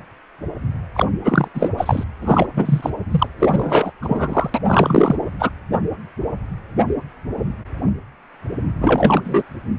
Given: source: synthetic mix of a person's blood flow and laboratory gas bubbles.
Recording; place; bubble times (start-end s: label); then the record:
Doppler ultrasound of blood flow; precordium
0.94-1.05 s: bubbles
1.24-1.48 s: bubbles
1.54-1.69 s: bubbles
1.77-2.04 s: bubbles
2.21-2.48 s: bubbles
2.56-2.90 s: bubbles
3.10-3.27 s: bubbles
3.39-3.92 s: bubbles
4.01-4.50 s: bubbles
4.54-4.59 s: bubbles
4.67-5.15 s: bubbles
5.39-5.50 s: bubbles
8.80-9.43 s: bubbles
From the record:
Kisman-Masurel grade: 333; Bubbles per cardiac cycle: rolling drumbeat, 9 or more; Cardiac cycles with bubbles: 50 to 99%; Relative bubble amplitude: loud (0.450 to 0.775); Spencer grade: 3 (all of the cardiac periods contain showers or single bubble signals, but not dominating or overriding the cardiac motion signals); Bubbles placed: anywhere in the cardiac cycle